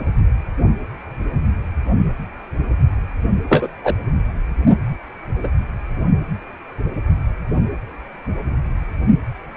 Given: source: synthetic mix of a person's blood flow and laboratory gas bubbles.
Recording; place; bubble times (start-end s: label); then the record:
Doppler ultrasound of blood flow; precordium
3.49-3.68 s: bubbles
3.83-3.96 s: bubbles
5.43-5.48 s: bubbles
From the record:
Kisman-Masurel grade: 123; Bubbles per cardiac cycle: 1 to 2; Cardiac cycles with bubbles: 10 to 50%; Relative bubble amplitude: loud (0.450 to 0.775); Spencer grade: 2 (many but less than half of the cardiac periods contain bubble signals, singularly or in groups); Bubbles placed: anywhere in the cardiac cycle